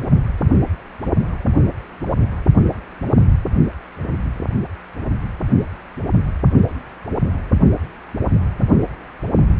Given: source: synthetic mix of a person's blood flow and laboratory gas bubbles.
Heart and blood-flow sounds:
Doppler ultrasound of blood flow; precordium
no bubbles
From the record:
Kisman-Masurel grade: 000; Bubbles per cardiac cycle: 0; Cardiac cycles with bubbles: 0%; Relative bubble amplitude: no bubbles discernible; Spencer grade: 0 (complete lack of bubble signals)

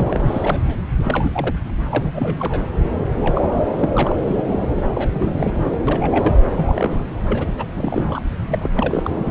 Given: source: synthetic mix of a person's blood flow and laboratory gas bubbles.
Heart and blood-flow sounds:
Doppler ultrasound of blood flow; subclavian vein
0.00-0.77 s: bubbles
0.99-1.56 s: bubbles
1.90-2.62 s: bubbles
3.21-3.45 s: bubbles
3.51-3.75 s: bubbles
3.78-4.16 s: bubbles
4.20-4.43 s: bubbles
4.49-4.82 s: bubbles
4.88-5.09 s: bubbles
5.15-5.51 s: bubbles
5.54-5.71 s: bubbles
5.87-6.33 s: bubbles
6.57-7.03 s: bubbles
7.28-7.46 s: bubbles
7.56-7.65 s: bubbles
7.76-8.22 s: bubbles
8.49-8.70 s: bubbles
8.75-9.31 s: bubbles
From the record:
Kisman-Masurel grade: 342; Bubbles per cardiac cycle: rolling drumbeat, 9 or more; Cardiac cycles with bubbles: 100%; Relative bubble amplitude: moderate (0.250 to 0.450); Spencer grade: 3 (all of the cardiac periods contain showers or single bubble signals, but not dominating or overriding the cardiac motion signals); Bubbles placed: anywhere in the cardiac cycle

